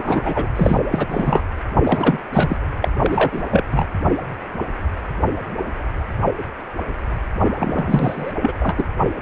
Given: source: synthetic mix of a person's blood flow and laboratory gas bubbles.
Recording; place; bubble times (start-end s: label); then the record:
Doppler ultrasound of blood flow; precordium
0.00-0.48 s: bubbles
0.55-0.79 s: bubbles
0.91-1.07 s: bubbles
1.09-1.41 s: bubbles
1.83-2.19 s: bubbles
2.33-2.57 s: bubbles
2.81-2.90 s: bubbles
2.99-3.43 s: bubbles
3.50-3.64 s: bubbles
3.71-3.85 s: bubbles
7.58-8.33 s: bubbles
8.41-8.53 s: bubbles
8.61-8.87 s: bubbles
From the record:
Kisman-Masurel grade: 333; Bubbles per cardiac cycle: rolling drumbeat, 9 or more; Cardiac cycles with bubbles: 50 to 99%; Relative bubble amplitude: loud (0.450 to 0.775); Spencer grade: 3 (all of the cardiac periods contain showers or single bubble signals, but not dominating or overriding the cardiac motion signals); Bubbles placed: anywhere in the cardiac cycle